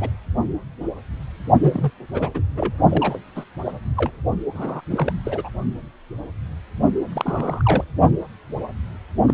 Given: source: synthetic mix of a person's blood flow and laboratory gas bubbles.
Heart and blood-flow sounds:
Doppler ultrasound of blood flow; precordium
0.00-0.09 s: bubbles
1.61-1.90 s: bubbles
2.14-2.29 s: bubbles
2.34-2.42 s: bubbles
2.55-2.73 s: bubbles
2.90-3.20 s: bubbles
3.35-3.44 s: bubbles
3.66-3.72 s: bubbles
3.96-4.12 s: bubbles
4.54-4.81 s: bubbles
4.90-5.12 s: bubbles
5.25-5.49 s: bubbles
7.12-7.84 s: bubbles
9.28-9.34 s: bubbles
From the record:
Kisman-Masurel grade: 232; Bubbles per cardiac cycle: several, 3 to 8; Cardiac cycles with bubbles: 50 to 99%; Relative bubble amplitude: moderate (0.250 to 0.450); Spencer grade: 3 (all of the cardiac periods contain showers or single bubble signals, but not dominating or overriding the cardiac motion signals); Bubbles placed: only in the low amplitude regions of the cardiac cycle

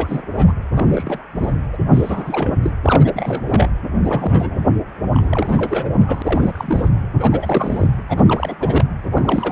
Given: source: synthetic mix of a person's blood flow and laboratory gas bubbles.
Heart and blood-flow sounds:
Doppler ultrasound of blood flow; precordium
0.00-0.53 s: bubbles
0.73-1.23 s: bubbles
1.35-1.56 s: bubbles
1.73-1.78 s: bubbles
1.91-2.55 s: bubbles
2.62-2.71 s: bubbles
2.83-3.71 s: bubbles
3.87-4.59 s: bubbles
5.12-5.89 s: bubbles
5.93-6.89 s: bubbles
7.19-8.03 s: bubbles
8.08-8.55 s: bubbles
8.60-8.85 s: bubbles
9.04-9.52 s: bubbles
From the record:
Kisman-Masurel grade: 342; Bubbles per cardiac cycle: rolling drumbeat, 9 or more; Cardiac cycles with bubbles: 100%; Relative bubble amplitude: moderate (0.250 to 0.450); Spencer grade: 3 (all of the cardiac periods contain showers or single bubble signals, but not dominating or overriding the cardiac motion signals); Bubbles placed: anywhere in the cardiac cycle

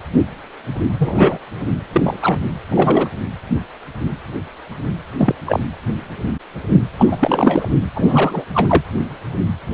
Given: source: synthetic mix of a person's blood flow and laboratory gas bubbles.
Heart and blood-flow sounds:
Doppler ultrasound of blood flow; precordium
0.98-1.39 s: bubbles
1.93-2.19 s: bubbles
2.21-2.39 s: bubbles
2.68-3.09 s: bubbles
5.18-5.33 s: bubbles
5.46-5.60 s: bubbles
6.98-7.68 s: bubbles
7.95-8.45 s: bubbles
8.54-8.82 s: bubbles
From the record:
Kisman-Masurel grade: 233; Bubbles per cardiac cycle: several, 3 to 8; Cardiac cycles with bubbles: 50 to 99%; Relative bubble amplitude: loud (0.450 to 0.775); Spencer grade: 3 (all of the cardiac periods contain showers or single bubble signals, but not dominating or overriding the cardiac motion signals); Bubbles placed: anywhere in the cardiac cycle

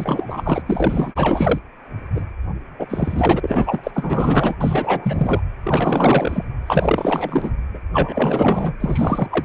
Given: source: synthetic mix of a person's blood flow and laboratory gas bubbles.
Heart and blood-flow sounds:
Doppler ultrasound of blood flow; precordium
0.00-0.62 s: bubbles
0.66-1.11 s: bubbles
1.16-1.59 s: bubbles
2.15-2.24 s: bubbles
2.78-3.79 s: bubbles
3.83-3.91 s: bubbles
3.94-4.56 s: bubbles
4.60-5.39 s: bubbles
5.63-6.45 s: bubbles
6.67-7.50 s: bubbles
7.74-7.79 s: bubbles
7.93-8.75 s: bubbles
8.80-9.45 s: bubbles
From the record:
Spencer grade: 4 (maximum detectable bubble signal sounding continuously throughout systole and diastole of every cardiac period, and overriding the amplitude of the normal cardiac signals); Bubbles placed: anywhere in the cardiac cycle

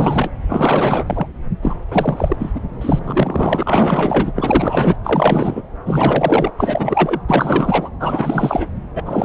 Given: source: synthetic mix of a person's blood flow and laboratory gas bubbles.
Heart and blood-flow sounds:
Doppler ultrasound of blood flow; subclavian vein
0.00-0.30 s: bubbles
0.49-1.26 s: bubbles
1.62-1.76 s: bubbles
1.91-2.36 s: bubbles
2.39-2.62 s: bubbles
2.81-4.31 s: bubbles
4.35-4.96 s: bubbles
5.04-5.62 s: bubbles
5.85-6.51 s: bubbles
6.57-7.20 s: bubbles
7.29-7.89 s: bubbles
7.99-8.67 s: bubbles
8.94-9.03 s: bubbles
9.05-9.25 s: bubbles
From the record:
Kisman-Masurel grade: 444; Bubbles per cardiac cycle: continuous sound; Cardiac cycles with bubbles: 100%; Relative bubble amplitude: maximal (0.775 to 0.999); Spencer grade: 4 (maximum detectable bubble signal sounding continuously throughout systole and diastole of every cardiac period, and overriding the amplitude of the normal cardiac signals); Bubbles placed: anywhere in the cardiac cycle

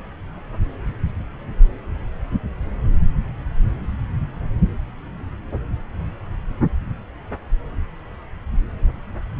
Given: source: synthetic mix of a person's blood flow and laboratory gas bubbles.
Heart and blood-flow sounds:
Doppler ultrasound of blood flow; subclavian vein
no bubbles
From the record:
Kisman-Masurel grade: 000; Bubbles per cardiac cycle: 0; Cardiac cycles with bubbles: 0%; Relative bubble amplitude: no bubbles discernible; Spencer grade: 0 (complete lack of bubble signals)

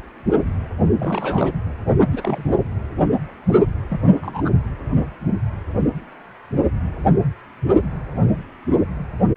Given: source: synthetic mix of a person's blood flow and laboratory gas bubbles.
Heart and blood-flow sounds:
Doppler ultrasound of blood flow; precordium
1.00-1.54 s: bubbles
2.11-2.50 s: bubbles
3.89-4.16 s: bubbles
4.21-4.50 s: bubbles
From the record:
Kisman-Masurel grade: 221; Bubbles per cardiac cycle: several, 3 to 8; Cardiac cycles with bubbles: 10 to 50%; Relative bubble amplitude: barely perceptible (0.100 to 0.250); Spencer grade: 2 (many but less than half of the cardiac periods contain bubble signals, singularly or in groups); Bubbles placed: anywhere in the cardiac cycle

